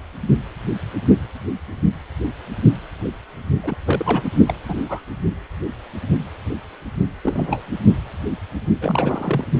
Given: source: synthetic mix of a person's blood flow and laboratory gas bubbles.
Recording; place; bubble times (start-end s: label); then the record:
Doppler ultrasound of blood flow; precordium
3.63-3.77 s: bubbles
3.85-4.29 s: bubbles
4.47-4.54 s: bubbles
4.68-5.01 s: bubbles
7.23-7.71 s: bubbles
8.82-9.45 s: bubbles
From the record:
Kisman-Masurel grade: 222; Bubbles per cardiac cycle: several, 3 to 8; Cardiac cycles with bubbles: 10 to 50%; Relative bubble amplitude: moderate (0.250 to 0.450); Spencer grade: 2 (many but less than half of the cardiac periods contain bubble signals, singularly or in groups); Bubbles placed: only in the low amplitude regions of the cardiac cycle